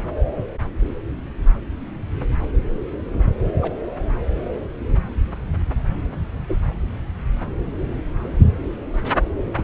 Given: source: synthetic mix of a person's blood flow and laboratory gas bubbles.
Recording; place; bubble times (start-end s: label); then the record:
Doppler ultrasound of blood flow; subclavian vein
3.61-3.73 s: bubbles
6.48-6.60 s: bubbles
9.56-9.64 s: bubbles
From the record:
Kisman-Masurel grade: 121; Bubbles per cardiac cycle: 1 to 2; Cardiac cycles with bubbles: 10 to 50%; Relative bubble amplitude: barely perceptible (0.100 to 0.250); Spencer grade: 2 (many but less than half of the cardiac periods contain bubble signals, singularly or in groups); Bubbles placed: anywhere in the cardiac cycle